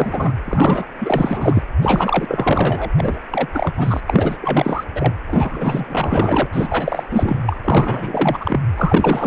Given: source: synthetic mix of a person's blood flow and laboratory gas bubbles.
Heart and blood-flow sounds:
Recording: Doppler ultrasound of blood flow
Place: precordium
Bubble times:
0.00-0.34 s: bubbles
0.46-0.85 s: bubbles
1.01-1.63 s: bubbles
1.81-2.90 s: bubbles
2.96-3.20 s: bubbles
3.31-3.48 s: bubbles
3.52-4.00 s: bubbles
4.06-4.37 s: bubbles
4.41-4.84 s: bubbles
4.95-5.14 s: bubbles
5.27-6.46 s: bubbles
6.52-7.58 s: bubbles
7.65-8.61 s: bubbles
8.77-9.27 s: bubbles
From the record:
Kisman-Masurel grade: 444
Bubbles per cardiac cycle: continuous sound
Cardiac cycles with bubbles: 100%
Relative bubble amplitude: maximal (0.775 to 0.999)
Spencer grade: 4 (maximum detectable bubble signal sounding continuously throughout systole and diastole of every cardiac period, and overriding the amplitude of the normal cardiac signals)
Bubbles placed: anywhere in the cardiac cycle

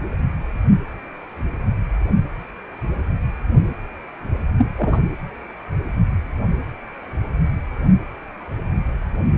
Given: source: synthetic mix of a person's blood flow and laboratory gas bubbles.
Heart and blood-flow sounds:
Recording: Doppler ultrasound of blood flow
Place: precordium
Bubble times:
4.58-4.67 s: bubbles
4.78-4.99 s: bubbles
From the record:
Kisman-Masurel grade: 212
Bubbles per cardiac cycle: several, 3 to 8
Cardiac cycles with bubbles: 1 to 10%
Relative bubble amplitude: moderate (0.250 to 0.450)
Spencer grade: 1 (occasional bubble signal discernible with the cardiac motion signal, with majority of cardiac periods free of bubbles)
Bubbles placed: anywhere in the cardiac cycle

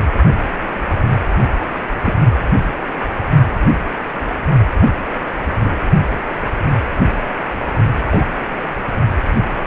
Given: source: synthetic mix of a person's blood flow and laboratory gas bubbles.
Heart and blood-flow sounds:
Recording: Doppler ultrasound of blood flow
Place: precordium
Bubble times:
2.03-2.14 s: bubbles
4.80-4.88 s: bubbles
5.64-5.76 s: bubbles
8.09-8.26 s: bubbles
From the record:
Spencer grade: 2 (many but less than half of the cardiac periods contain bubble signals, singularly or in groups)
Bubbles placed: only in the low amplitude regions of the cardiac cycle

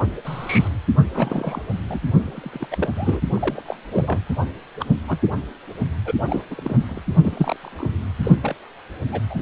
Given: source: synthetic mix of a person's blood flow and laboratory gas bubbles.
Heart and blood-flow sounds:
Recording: Doppler ultrasound of blood flow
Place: precordium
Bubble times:
0.24-0.70 s: bubbles
1.12-1.61 s: bubbles
1.89-2.00 s: bubbles
2.23-2.66 s: bubbles
2.71-2.90 s: bubbles
2.96-3.21 s: bubbles
3.33-3.63 s: bubbles
3.65-3.76 s: bubbles
3.90-4.19 s: bubbles
4.79-4.85 s: bubbles
5.07-5.18 s: bubbles
6.04-6.11 s: bubbles
6.28-6.43 s: bubbles
6.50-7.02 s: bubbles
7.22-7.56 s: bubbles
7.61-7.94 s: bubbles
8.23-8.35 s: bubbles
8.42-8.55 s: bubbles
9.12-9.21 s: bubbles
9.30-9.42 s: bubbles
From the record:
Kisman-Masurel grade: 242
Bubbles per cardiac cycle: several, 3 to 8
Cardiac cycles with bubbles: 100%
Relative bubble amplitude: moderate (0.250 to 0.450)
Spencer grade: 3 (all of the cardiac periods contain showers or single bubble signals, but not dominating or overriding the cardiac motion signals)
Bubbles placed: anywhere in the cardiac cycle

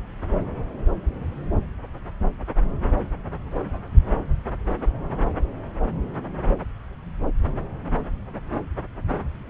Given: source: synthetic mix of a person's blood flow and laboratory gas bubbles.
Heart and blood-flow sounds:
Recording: Doppler ultrasound of blood flow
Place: subclavian vein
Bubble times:
no bubbles
From the record:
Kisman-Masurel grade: 000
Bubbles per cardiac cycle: 0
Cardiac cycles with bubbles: 0%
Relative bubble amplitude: no bubbles discernible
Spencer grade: 0 (complete lack of bubble signals)

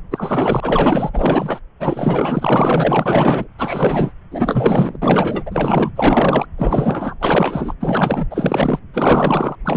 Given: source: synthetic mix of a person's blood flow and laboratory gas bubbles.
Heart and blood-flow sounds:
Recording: Doppler ultrasound of blood flow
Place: subclavian vein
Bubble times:
0.11-1.10 s: bubbles
1.13-1.59 s: bubbles
1.79-3.48 s: bubbles
3.58-4.12 s: bubbles
4.31-4.98 s: bubbles
5.01-5.43 s: bubbles
5.46-5.92 s: bubbles
5.96-6.46 s: bubbles
6.58-7.15 s: bubbles
7.20-7.74 s: bubbles
7.80-8.26 s: bubbles
8.30-8.79 s: bubbles
8.93-9.56 s: bubbles
9.64-9.77 s: bubbles
From the record:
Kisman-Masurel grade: 444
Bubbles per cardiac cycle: continuous sound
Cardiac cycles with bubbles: 100%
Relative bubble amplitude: maximal (0.775 to 0.999)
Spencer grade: 4 (maximum detectable bubble signal sounding continuously throughout systole and diastole of every cardiac period, and overriding the amplitude of the normal cardiac signals)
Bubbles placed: anywhere in the cardiac cycle

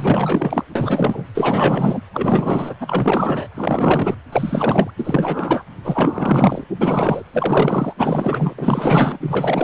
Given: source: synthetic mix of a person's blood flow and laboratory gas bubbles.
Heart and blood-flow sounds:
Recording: Doppler ultrasound of blood flow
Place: precordium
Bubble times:
0.00-0.64 s: bubbles
0.75-1.23 s: bubbles
1.34-2.02 s: bubbles
2.13-2.75 s: bubbles
2.80-3.47 s: bubbles
3.54-4.16 s: bubbles
4.32-4.91 s: bubbles
4.97-5.63 s: bubbles
5.84-6.64 s: bubbles
6.81-7.22 s: bubbles
7.33-7.93 s: bubbles
7.98-8.54 s: bubbles
8.57-9.63 s: bubbles
From the record:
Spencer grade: 4 (maximum detectable bubble signal sounding continuously throughout systole and diastole of every cardiac period, and overriding the amplitude of the normal cardiac signals)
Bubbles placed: anywhere in the cardiac cycle

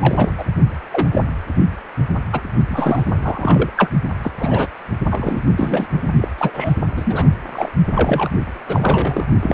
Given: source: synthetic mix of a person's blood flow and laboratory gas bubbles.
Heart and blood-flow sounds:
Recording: Doppler ultrasound of blood flow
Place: precordium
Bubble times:
0.00-0.31 s: bubbles
0.38-0.45 s: bubbles
0.92-1.08 s: bubbles
1.14-1.24 s: bubbles
2.32-2.41 s: bubbles
2.67-3.13 s: bubbles
3.22-3.70 s: bubbles
3.76-3.90 s: bubbles
4.23-4.31 s: bubbles
4.39-4.68 s: bubbles
5.10-5.43 s: bubbles
5.57-5.87 s: bubbles
6.21-6.29 s: bubbles
6.38-6.74 s: bubbles
6.96-7.25 s: bubbles
7.52-7.69 s: bubbles
7.95-8.29 s: bubbles
8.68-9.25 s: bubbles
9.42-9.53 s: bubbles
From the record:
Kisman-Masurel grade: 243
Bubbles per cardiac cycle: several, 3 to 8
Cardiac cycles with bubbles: 100%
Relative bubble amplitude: loud (0.450 to 0.775)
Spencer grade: 3 (all of the cardiac periods contain showers or single bubble signals, but not dominating or overriding the cardiac motion signals)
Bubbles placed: only in the low amplitude regions of the cardiac cycle

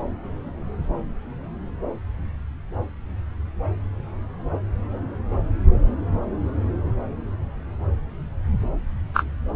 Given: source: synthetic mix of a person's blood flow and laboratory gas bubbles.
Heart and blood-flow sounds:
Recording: Doppler ultrasound of blood flow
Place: subclavian vein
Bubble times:
9.13-9.25 s: bubbles
From the record:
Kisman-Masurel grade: 213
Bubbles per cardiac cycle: several, 3 to 8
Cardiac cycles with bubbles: 1 to 10%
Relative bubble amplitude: loud (0.450 to 0.775)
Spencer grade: 1 (occasional bubble signal discernible with the cardiac motion signal, with majority of cardiac periods free of bubbles)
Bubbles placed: anywhere in the cardiac cycle

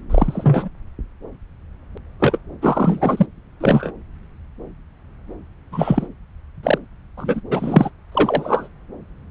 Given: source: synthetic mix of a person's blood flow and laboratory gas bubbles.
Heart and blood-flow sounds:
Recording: Doppler ultrasound of blood flow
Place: subclavian vein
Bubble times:
0.09-0.68 s: bubbles
2.19-2.38 s: bubbles
2.61-3.26 s: bubbles
3.60-3.91 s: bubbles
5.72-6.06 s: bubbles
6.63-6.78 s: bubbles
7.17-7.40 s: bubbles
7.51-7.90 s: bubbles
8.12-8.68 s: bubbles
From the record:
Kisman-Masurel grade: 233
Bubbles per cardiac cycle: several, 3 to 8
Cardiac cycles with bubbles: 50 to 99%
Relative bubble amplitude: loud (0.450 to 0.775)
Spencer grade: 3 (all of the cardiac periods contain showers or single bubble signals, but not dominating or overriding the cardiac motion signals)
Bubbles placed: anywhere in the cardiac cycle

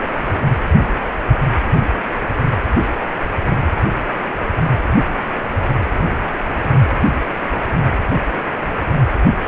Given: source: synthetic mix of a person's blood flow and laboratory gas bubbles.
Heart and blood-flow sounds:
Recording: Doppler ultrasound of blood flow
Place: precordium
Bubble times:
no bubbles
From the record:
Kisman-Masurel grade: 000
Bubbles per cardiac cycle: 0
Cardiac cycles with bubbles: 0%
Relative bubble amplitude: no bubbles discernible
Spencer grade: 0 (complete lack of bubble signals)

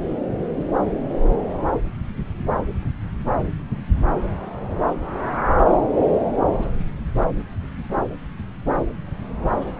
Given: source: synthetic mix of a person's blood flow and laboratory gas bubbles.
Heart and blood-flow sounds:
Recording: Doppler ultrasound of blood flow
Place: subclavian vein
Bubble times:
no bubbles
From the record:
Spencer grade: 0 (complete lack of bubble signals)

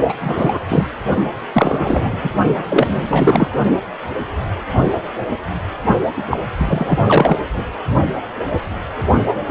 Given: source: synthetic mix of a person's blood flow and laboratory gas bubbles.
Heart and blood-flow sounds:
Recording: Doppler ultrasound of blood flow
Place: precordium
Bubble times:
0.09-0.15 s: bubbles
0.21-0.61 s: bubbles
0.68-0.88 s: bubbles
1.53-2.30 s: bubbles
2.69-3.50 s: bubbles
6.17-6.23 s: bubbles
6.30-6.39 s: bubbles
6.57-7.39 s: bubbles
7.54-7.64 s: bubbles
9.28-9.34 s: bubbles
9.49-9.51 s: bubbles
From the record:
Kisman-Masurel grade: 333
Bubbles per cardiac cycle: rolling drumbeat, 9 or more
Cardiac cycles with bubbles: 50 to 99%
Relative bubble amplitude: loud (0.450 to 0.775)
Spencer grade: 3 (all of the cardiac periods contain showers or single bubble signals, but not dominating or overriding the cardiac motion signals)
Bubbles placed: only in the low amplitude regions of the cardiac cycle

